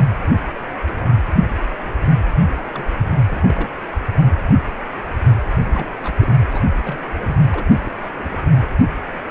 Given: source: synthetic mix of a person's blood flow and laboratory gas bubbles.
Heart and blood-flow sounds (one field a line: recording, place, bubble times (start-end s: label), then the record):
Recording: Doppler ultrasound of blood flow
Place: precordium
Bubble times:
2.53-2.69 s: bubbles
2.72-2.88 s: bubbles
3.27-3.74 s: bubbles
3.90-3.96 s: bubbles
5.71-5.87 s: bubbles
6.03-6.13 s: bubbles
6.18-6.37 s: bubbles
6.52-6.62 s: bubbles
6.85-7.16 s: bubbles
7.23-7.37 s: bubbles
7.51-7.66 s: bubbles
7.69-7.95 s: bubbles
8.19-8.39 s: bubbles
From the record:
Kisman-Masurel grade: 221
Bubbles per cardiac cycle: several, 3 to 8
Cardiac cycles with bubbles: 10 to 50%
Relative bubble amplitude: barely perceptible (0.100 to 0.250)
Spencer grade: 2 (many but less than half of the cardiac periods contain bubble signals, singularly or in groups)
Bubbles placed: anywhere in the cardiac cycle